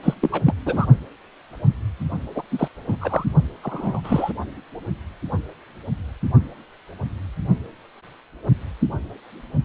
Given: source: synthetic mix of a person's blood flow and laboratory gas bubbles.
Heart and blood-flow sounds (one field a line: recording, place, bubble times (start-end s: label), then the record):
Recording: Doppler ultrasound of blood flow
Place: precordium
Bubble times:
0.03-0.14 s: bubbles
0.21-0.53 s: bubbles
0.65-0.86 s: bubbles
2.34-2.42 s: bubbles
2.51-2.68 s: bubbles
2.88-2.96 s: bubbles
3.00-3.24 s: bubbles
3.62-4.01 s: bubbles
4.04-4.33 s: bubbles
From the record:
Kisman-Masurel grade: 222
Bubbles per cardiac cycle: several, 3 to 8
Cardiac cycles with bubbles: 10 to 50%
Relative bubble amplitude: moderate (0.250 to 0.450)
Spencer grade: 2 (many but less than half of the cardiac periods contain bubble signals, singularly or in groups)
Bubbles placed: only in the low amplitude regions of the cardiac cycle